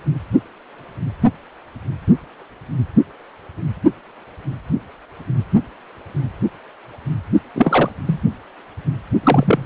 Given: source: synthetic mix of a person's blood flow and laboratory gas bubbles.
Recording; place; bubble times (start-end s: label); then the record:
Doppler ultrasound of blood flow; precordium
7.55-7.90 s: bubbles
8.07-8.21 s: bubbles
9.23-9.65 s: bubbles
From the record:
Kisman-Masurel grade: 223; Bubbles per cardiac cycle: several, 3 to 8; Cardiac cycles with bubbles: 10 to 50%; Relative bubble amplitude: loud (0.450 to 0.775); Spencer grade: 2 (many but less than half of the cardiac periods contain bubble signals, singularly or in groups); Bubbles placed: only in the low amplitude regions of the cardiac cycle